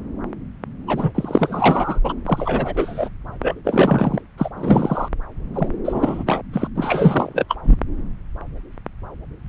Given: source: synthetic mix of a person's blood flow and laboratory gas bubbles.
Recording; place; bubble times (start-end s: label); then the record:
Doppler ultrasound of blood flow; subclavian vein
0.87-1.11 s: bubbles
1.15-1.99 s: bubbles
2.04-2.15 s: bubbles
2.25-3.08 s: bubbles
3.40-3.60 s: bubbles
3.64-4.22 s: bubbles
4.38-4.49 s: bubbles
4.56-5.08 s: bubbles
5.54-5.68 s: bubbles
5.85-6.24 s: bubbles
6.26-6.43 s: bubbles
6.53-6.68 s: bubbles
6.75-7.46 s: bubbles
7.49-7.56 s: bubbles
7.63-7.77 s: bubbles
From the record:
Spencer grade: 3 (all of the cardiac periods contain showers or single bubble signals, but not dominating or overriding the cardiac motion signals); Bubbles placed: anywhere in the cardiac cycle